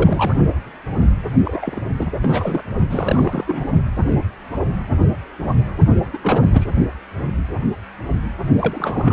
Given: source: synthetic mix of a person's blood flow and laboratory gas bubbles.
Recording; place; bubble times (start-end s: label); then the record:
Doppler ultrasound of blood flow; precordium
0.00-0.36 s: bubbles
1.45-1.81 s: bubbles
1.98-2.08 s: bubbles
2.21-2.63 s: bubbles
2.90-3.44 s: bubbles
3.46-3.66 s: bubbles
6.13-6.18 s: bubbles
6.21-6.73 s: bubbles
8.58-9.13 s: bubbles
From the record:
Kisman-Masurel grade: 332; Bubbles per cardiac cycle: rolling drumbeat, 9 or more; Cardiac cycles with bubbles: 50 to 99%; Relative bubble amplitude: moderate (0.250 to 0.450); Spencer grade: 3 (all of the cardiac periods contain showers or single bubble signals, but not dominating or overriding the cardiac motion signals); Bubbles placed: only in the low amplitude regions of the cardiac cycle